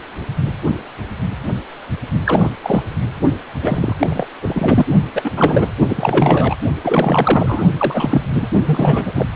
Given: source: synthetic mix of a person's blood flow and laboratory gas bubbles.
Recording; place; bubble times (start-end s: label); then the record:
Doppler ultrasound of blood flow; precordium
2.26-2.50 s: bubbles
2.63-2.83 s: bubbles
3.62-3.95 s: bubbles
3.99-4.26 s: bubbles
4.42-4.85 s: bubbles
5.15-5.32 s: bubbles
5.37-5.70 s: bubbles
5.89-6.55 s: bubbles
6.83-7.63 s: bubbles
7.78-8.21 s: bubbles
8.35-8.47 s: bubbles
8.65-9.28 s: bubbles
From the record:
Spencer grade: 3 (all of the cardiac periods contain showers or single bubble signals, but not dominating or overriding the cardiac motion signals); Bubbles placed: only in the low amplitude regions of the cardiac cycle